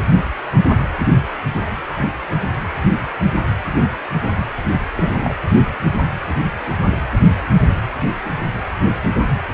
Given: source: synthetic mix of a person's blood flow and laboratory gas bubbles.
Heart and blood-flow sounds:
Doppler ultrasound of blood flow; precordium
4.97-5.36 s: bubbles
From the record:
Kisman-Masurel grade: 122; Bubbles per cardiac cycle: 1 to 2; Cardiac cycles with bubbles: 10 to 50%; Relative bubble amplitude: moderate (0.250 to 0.450); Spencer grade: 2 (many but less than half of the cardiac periods contain bubble signals, singularly or in groups); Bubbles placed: anywhere in the cardiac cycle

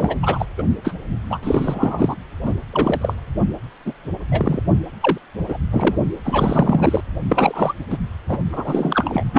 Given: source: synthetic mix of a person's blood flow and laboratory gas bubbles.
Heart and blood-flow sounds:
Doppler ultrasound of blood flow; precordium
0.00-0.15 s: bubbles
0.22-0.45 s: bubbles
0.57-0.63 s: bubbles
0.84-0.93 s: bubbles
1.30-1.39 s: bubbles
1.43-2.16 s: bubbles
2.45-2.54 s: bubbles
2.70-3.14 s: bubbles
3.85-3.92 s: bubbles
4.32-4.62 s: bubbles
5.00-5.17 s: bubbles
5.48-5.57 s: bubbles
5.71-5.96 s: bubbles
6.25-7.01 s: bubbles
7.29-7.73 s: bubbles
7.89-7.97 s: bubbles
8.29-8.38 s: bubbles
8.52-9.23 s: bubbles
9.33-9.39 s: bubbles
From the record:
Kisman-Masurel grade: 233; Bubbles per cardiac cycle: several, 3 to 8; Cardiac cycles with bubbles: 50 to 99%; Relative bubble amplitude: loud (0.450 to 0.775); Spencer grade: 3 (all of the cardiac periods contain showers or single bubble signals, but not dominating or overriding the cardiac motion signals); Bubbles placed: only in the low amplitude regions of the cardiac cycle

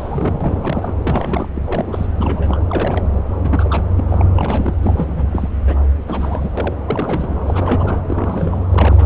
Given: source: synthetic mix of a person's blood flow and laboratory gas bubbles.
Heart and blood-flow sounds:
Doppler ultrasound of blood flow; subclavian vein
0.00-0.95 s: bubbles
1.00-1.48 s: bubbles
1.55-1.61 s: bubbles
1.66-2.07 s: bubbles
2.18-2.61 s: bubbles
2.68-3.07 s: bubbles
3.42-3.94 s: bubbles
3.97-4.03 s: bubbles
4.08-4.25 s: bubbles
4.35-4.74 s: bubbles
4.81-5.25 s: bubbles
5.32-5.49 s: bubbles
5.66-5.77 s: bubbles
6.07-6.50 s: bubbles
6.57-6.75 s: bubbles
6.86-7.36 s: bubbles
7.46-7.99 s: bubbles
8.08-8.59 s: bubbles
8.71-9.05 s: bubbles
From the record:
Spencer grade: 3 (all of the cardiac periods contain showers or single bubble signals, but not dominating or overriding the cardiac motion signals); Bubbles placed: anywhere in the cardiac cycle

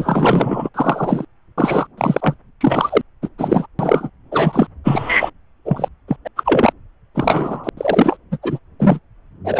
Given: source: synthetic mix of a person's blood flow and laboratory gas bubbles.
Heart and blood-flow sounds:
Doppler ultrasound of blood flow; subclavian vein
0.00-0.69 s: bubbles
0.74-1.25 s: bubbles
1.58-1.87 s: bubbles
1.98-2.34 s: bubbles
2.60-3.01 s: bubbles
3.22-3.28 s: bubbles
3.38-3.66 s: bubbles
3.79-4.10 s: bubbles
4.32-4.67 s: bubbles
4.84-5.30 s: bubbles
5.65-5.89 s: bubbles
6.08-6.17 s: bubbles
6.25-6.28 s: bubbles
6.36-6.73 s: bubbles
7.15-7.69 s: bubbles
7.77-8.16 s: bubbles
8.31-8.37 s: bubbles
8.42-8.58 s: bubbles
8.79-8.99 s: bubbles
9.45-9.59 s: bubbles
From the record:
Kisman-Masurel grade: 243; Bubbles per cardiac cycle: several, 3 to 8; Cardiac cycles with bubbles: 100%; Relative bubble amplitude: loud (0.450 to 0.775); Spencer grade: 3 (all of the cardiac periods contain showers or single bubble signals, but not dominating or overriding the cardiac motion signals); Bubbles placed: anywhere in the cardiac cycle

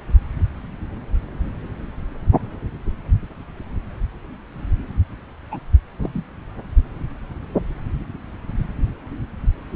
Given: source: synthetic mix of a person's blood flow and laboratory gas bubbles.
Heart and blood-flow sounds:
Doppler ultrasound of blood flow; subclavian vein
5.51-5.59 s: bubbles
5.99-6.25 s: bubbles
From the record:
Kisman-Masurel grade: 211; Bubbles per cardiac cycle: several, 3 to 8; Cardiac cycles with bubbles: 1 to 10%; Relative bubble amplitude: barely perceptible (0.100 to 0.250); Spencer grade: 1 (occasional bubble signal discernible with the cardiac motion signal, with majority of cardiac periods free of bubbles); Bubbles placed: anywhere in the cardiac cycle

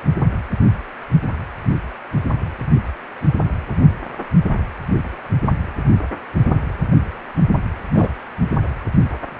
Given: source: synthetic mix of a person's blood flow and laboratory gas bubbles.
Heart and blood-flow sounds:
Doppler ultrasound of blood flow; precordium
7.95-8.09 s: bubbles
From the record:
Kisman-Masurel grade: 113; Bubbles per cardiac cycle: 1 to 2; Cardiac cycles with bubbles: 1 to 10%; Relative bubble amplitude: loud (0.450 to 0.775); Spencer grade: 1 (occasional bubble signal discernible with the cardiac motion signal, with majority of cardiac periods free of bubbles); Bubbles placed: anywhere in the cardiac cycle

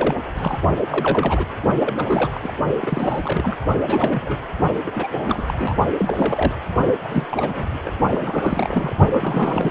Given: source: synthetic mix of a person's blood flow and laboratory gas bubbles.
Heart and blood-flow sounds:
Doppler ultrasound of blood flow; precordium
0.00-0.15 s: bubbles
0.35-0.57 s: bubbles
0.61-0.69 s: bubbles
0.89-1.46 s: bubbles
1.76-1.81 s: bubbles
1.85-2.53 s: bubbles
2.81-3.55 s: bubbles
3.87-4.37 s: bubbles
4.86-4.91 s: bubbles
4.95-5.19 s: bubbles
5.27-5.75 s: bubbles
5.98-6.55 s: bubbles
7.04-7.25 s: bubbles
7.31-7.77 s: bubbles
7.85-7.91 s: bubbles
8.10-8.93 s: bubbles
9.12-9.71 s: bubbles
From the record:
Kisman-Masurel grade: 342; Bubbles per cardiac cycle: rolling drumbeat, 9 or more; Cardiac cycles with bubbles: 100%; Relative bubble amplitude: moderate (0.250 to 0.450); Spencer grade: 3 (all of the cardiac periods contain showers or single bubble signals, but not dominating or overriding the cardiac motion signals); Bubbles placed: only in the low amplitude regions of the cardiac cycle

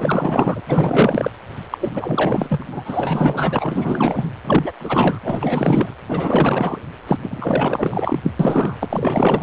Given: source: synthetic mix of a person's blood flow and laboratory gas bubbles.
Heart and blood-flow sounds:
Doppler ultrasound of blood flow; precordium
0.00-0.60 s: bubbles
0.67-1.30 s: bubbles
1.72-1.89 s: bubbles
1.94-2.64 s: bubbles
2.72-4.28 s: bubbles
4.44-4.72 s: bubbles
4.79-5.19 s: bubbles
5.23-5.94 s: bubbles
6.08-6.78 s: bubbles
7.07-7.17 s: bubbles
7.21-8.30 s: bubbles
8.39-8.76 s: bubbles
8.79-9.43 s: bubbles
From the record:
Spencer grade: 4 (maximum detectable bubble signal sounding continuously throughout systole and diastole of every cardiac period, and overriding the amplitude of the normal cardiac signals); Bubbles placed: anywhere in the cardiac cycle

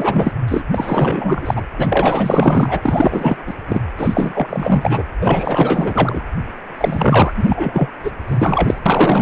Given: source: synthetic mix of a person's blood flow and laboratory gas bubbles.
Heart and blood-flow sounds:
Doppler ultrasound of blood flow; precordium
0.00-0.32 s: bubbles
0.47-0.62 s: bubbles
0.71-1.65 s: bubbles
1.77-3.37 s: bubbles
3.46-3.54 s: bubbles
3.68-3.82 s: bubbles
3.97-5.03 s: bubbles
5.20-6.23 s: bubbles
6.77-7.88 s: bubbles
8.04-8.12 s: bubbles
8.28-8.79 s: bubbles
8.86-9.22 s: bubbles
From the record:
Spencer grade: 4 (maximum detectable bubble signal sounding continuously throughout systole and diastole of every cardiac period, and overriding the amplitude of the normal cardiac signals); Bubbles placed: anywhere in the cardiac cycle

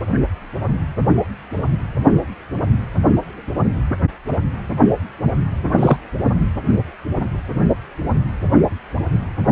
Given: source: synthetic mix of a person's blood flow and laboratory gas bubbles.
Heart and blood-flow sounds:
Doppler ultrasound of blood flow; precordium
5.78-5.98 s: bubbles
From the record:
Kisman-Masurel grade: 223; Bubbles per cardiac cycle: several, 3 to 8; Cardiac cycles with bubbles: 10 to 50%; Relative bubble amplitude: loud (0.450 to 0.775); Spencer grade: 2 (many but less than half of the cardiac periods contain bubble signals, singularly or in groups); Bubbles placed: anywhere in the cardiac cycle

